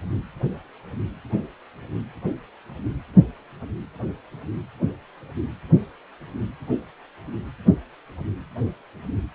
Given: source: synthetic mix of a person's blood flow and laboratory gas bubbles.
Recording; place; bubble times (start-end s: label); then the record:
Doppler ultrasound of blood flow; precordium
no bubbles
From the record:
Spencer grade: 0 (complete lack of bubble signals)